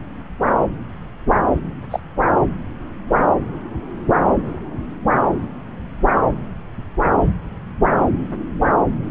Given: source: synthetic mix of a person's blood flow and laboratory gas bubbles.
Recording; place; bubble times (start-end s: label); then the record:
Doppler ultrasound of blood flow; subclavian vein
1.91-2.00 s: bubbles
From the record:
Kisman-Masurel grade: 112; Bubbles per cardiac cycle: 1 to 2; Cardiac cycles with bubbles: 1 to 10%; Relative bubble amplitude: moderate (0.250 to 0.450); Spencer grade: 1 (occasional bubble signal discernible with the cardiac motion signal, with majority of cardiac periods free of bubbles); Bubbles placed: anywhere in the cardiac cycle